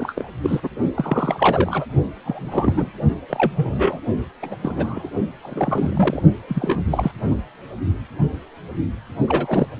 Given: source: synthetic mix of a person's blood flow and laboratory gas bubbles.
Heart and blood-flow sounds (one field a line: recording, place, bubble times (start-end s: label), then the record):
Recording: Doppler ultrasound of blood flow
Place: precordium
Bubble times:
0.00-0.13 s: bubbles
0.16-0.30 s: bubbles
0.41-0.69 s: bubbles
0.95-1.85 s: bubbles
2.25-2.92 s: bubbles
3.29-3.52 s: bubbles
3.56-3.99 s: bubbles
4.43-4.57 s: bubbles
4.61-5.10 s: bubbles
5.43-6.23 s: bubbles
6.48-6.83 s: bubbles
6.91-7.12 s: bubbles
9.28-9.67 s: bubbles
From the record:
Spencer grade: 3 (all of the cardiac periods contain showers or single bubble signals, but not dominating or overriding the cardiac motion signals)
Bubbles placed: only in the low amplitude regions of the cardiac cycle